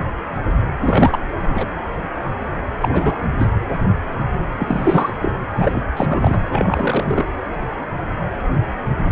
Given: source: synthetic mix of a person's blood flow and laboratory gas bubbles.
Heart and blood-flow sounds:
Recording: Doppler ultrasound of blood flow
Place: precordium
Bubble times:
0.81-1.19 s: bubbles
1.43-1.66 s: bubbles
2.80-3.15 s: bubbles
3.38-3.47 s: bubbles
4.58-5.13 s: bubbles
5.21-5.32 s: bubbles
5.55-5.83 s: bubbles
5.96-6.41 s: bubbles
6.48-7.25 s: bubbles
From the record:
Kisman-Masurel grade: 332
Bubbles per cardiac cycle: rolling drumbeat, 9 or more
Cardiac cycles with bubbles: 50 to 99%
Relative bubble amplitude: moderate (0.250 to 0.450)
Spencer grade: 3 (all of the cardiac periods contain showers or single bubble signals, but not dominating or overriding the cardiac motion signals)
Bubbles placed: anywhere in the cardiac cycle

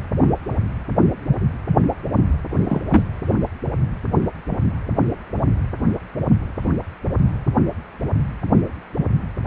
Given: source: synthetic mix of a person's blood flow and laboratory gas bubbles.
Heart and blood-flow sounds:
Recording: Doppler ultrasound of blood flow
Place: precordium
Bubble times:
2.61-2.81 s: bubbles
2.91-3.02 s: bubbles
9.45-9.47 s: bubbles
From the record:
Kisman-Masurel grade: 222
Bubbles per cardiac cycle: several, 3 to 8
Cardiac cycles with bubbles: 10 to 50%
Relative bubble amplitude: moderate (0.250 to 0.450)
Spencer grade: 2 (many but less than half of the cardiac periods contain bubble signals, singularly or in groups)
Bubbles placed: anywhere in the cardiac cycle

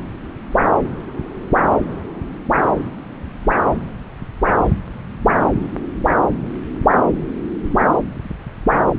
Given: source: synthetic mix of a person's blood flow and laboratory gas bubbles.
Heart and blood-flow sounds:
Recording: Doppler ultrasound of blood flow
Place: subclavian vein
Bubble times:
no bubbles
From the record:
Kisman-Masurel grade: 000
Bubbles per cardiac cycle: 0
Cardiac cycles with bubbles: 0%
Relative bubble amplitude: no bubbles discernible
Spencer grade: 0 (complete lack of bubble signals)

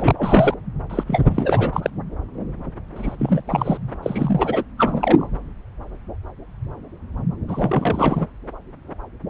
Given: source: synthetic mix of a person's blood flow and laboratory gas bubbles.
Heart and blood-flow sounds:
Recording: Doppler ultrasound of blood flow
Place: subclavian vein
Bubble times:
0.00-0.15 s: bubbles
0.17-0.54 s: bubbles
0.89-1.04 s: bubbles
1.07-1.90 s: bubbles
2.95-3.42 s: bubbles
3.47-3.77 s: bubbles
4.03-4.64 s: bubbles
4.78-5.27 s: bubbles
7.48-8.26 s: bubbles
From the record:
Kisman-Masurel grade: 332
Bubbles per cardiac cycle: rolling drumbeat, 9 or more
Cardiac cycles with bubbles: 50 to 99%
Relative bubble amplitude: moderate (0.250 to 0.450)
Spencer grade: 3 (all of the cardiac periods contain showers or single bubble signals, but not dominating or overriding the cardiac motion signals)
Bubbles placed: anywhere in the cardiac cycle

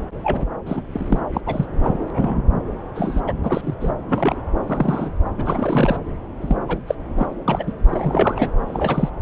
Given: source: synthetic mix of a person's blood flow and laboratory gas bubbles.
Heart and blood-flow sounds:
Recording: Doppler ultrasound of blood flow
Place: subclavian vein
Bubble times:
0.00-0.02 s: bubbles
0.23-0.44 s: bubbles
0.66-0.82 s: bubbles
0.92-1.20 s: bubbles
1.33-1.41 s: bubbles
1.47-1.66 s: bubbles
1.82-1.92 s: bubbles
2.10-2.42 s: bubbles
2.95-3.21 s: bubbles
3.27-3.33 s: bubbles
3.43-3.61 s: bubbles
3.63-3.75 s: bubbles
3.80-3.91 s: bubbles
4.08-4.42 s: bubbles
4.66-5.10 s: bubbles
5.38-5.97 s: bubbles
6.40-6.56 s: bubbles
6.68-6.78 s: bubbles
6.87-6.95 s: bubbles
7.16-7.27 s: bubbles
7.47-7.73 s: bubbles
7.87-8.49 s: bubbles
8.68-9.10 s: bubbles
From the record:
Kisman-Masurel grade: 242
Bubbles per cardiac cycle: several, 3 to 8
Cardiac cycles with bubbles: 100%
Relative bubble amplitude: moderate (0.250 to 0.450)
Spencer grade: 3 (all of the cardiac periods contain showers or single bubble signals, but not dominating or overriding the cardiac motion signals)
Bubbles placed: anywhere in the cardiac cycle

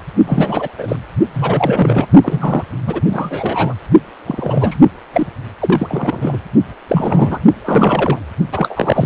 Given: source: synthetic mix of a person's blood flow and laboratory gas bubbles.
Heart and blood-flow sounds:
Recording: Doppler ultrasound of blood flow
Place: precordium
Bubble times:
0.26-0.69 s: bubbles
0.78-0.96 s: bubbles
1.33-2.06 s: bubbles
2.22-2.64 s: bubbles
2.86-3.02 s: bubbles
3.09-3.74 s: bubbles
4.26-4.82 s: bubbles
5.13-5.27 s: bubbles
5.60-6.38 s: bubbles
6.88-7.38 s: bubbles
7.66-8.19 s: bubbles
8.52-9.06 s: bubbles
From the record:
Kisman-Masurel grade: 343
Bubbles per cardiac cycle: rolling drumbeat, 9 or more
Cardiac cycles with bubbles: 100%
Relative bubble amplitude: loud (0.450 to 0.775)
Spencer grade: 3 (all of the cardiac periods contain showers or single bubble signals, but not dominating or overriding the cardiac motion signals)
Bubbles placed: only in the low amplitude regions of the cardiac cycle

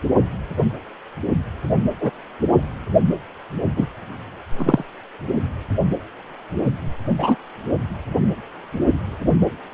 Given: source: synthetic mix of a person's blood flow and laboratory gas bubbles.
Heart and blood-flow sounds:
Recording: Doppler ultrasound of blood flow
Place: precordium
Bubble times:
2.00-2.10 s: bubbles
3.76-3.86 s: bubbles
4.57-4.84 s: bubbles
7.18-7.36 s: bubbles
From the record:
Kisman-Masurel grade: 123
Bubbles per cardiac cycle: 1 to 2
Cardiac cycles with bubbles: 10 to 50%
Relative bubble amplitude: loud (0.450 to 0.775)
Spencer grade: 2 (many but less than half of the cardiac periods contain bubble signals, singularly or in groups)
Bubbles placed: only in the low amplitude regions of the cardiac cycle

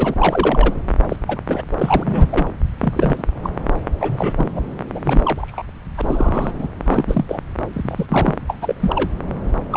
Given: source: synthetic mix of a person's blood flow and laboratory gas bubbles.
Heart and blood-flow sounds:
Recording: Doppler ultrasound of blood flow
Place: subclavian vein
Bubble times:
0.00-0.14 s: bubbles
0.19-0.73 s: bubbles
1.09-1.17 s: bubbles
1.27-1.40 s: bubbles
1.47-1.62 s: bubbles
1.77-2.47 s: bubbles
2.79-3.23 s: bubbles
3.43-3.50 s: bubbles
4.00-4.52 s: bubbles
4.55-4.61 s: bubbles
4.94-5.00 s: bubbles
5.04-5.22 s: bubbles
5.25-5.62 s: bubbles
5.97-6.67 s: bubbles
6.86-7.25 s: bubbles
7.29-7.39 s: bubbles
7.73-8.05 s: bubbles
8.10-8.35 s: bubbles
8.48-8.59 s: bubbles
8.62-8.75 s: bubbles
8.80-9.07 s: bubbles
9.71-9.76 s: bubbles
From the record:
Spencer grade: 3 (all of the cardiac periods contain showers or single bubble signals, but not dominating or overriding the cardiac motion signals)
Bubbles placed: anywhere in the cardiac cycle

